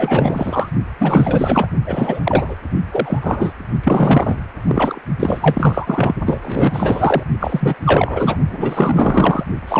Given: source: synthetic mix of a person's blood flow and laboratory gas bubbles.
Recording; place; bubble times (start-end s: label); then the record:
Doppler ultrasound of blood flow; precordium
0.00-0.70 s: bubbles
0.99-1.67 s: bubbles
1.86-2.20 s: bubbles
2.23-2.54 s: bubbles
2.91-3.19 s: bubbles
3.22-3.53 s: bubbles
3.83-4.36 s: bubbles
4.67-5.00 s: bubbles
5.20-6.14 s: bubbles
6.25-6.39 s: bubbles
6.42-7.24 s: bubbles
7.39-7.75 s: bubbles
7.85-8.41 s: bubbles
8.50-9.44 s: bubbles
9.68-9.80 s: bubbles
From the record:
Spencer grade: 4 (maximum detectable bubble signal sounding continuously throughout systole and diastole of every cardiac period, and overriding the amplitude of the normal cardiac signals); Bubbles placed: only in the low amplitude regions of the cardiac cycle